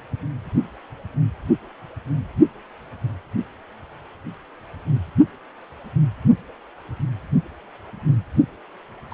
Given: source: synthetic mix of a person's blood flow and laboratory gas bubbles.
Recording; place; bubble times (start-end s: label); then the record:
Doppler ultrasound of blood flow; precordium
9.11-9.14 s: bubbles
From the record:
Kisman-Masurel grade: 122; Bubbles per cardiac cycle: 1 to 2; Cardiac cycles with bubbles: 10 to 50%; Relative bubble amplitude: moderate (0.250 to 0.450); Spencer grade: 2 (many but less than half of the cardiac periods contain bubble signals, singularly or in groups); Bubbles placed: anywhere in the cardiac cycle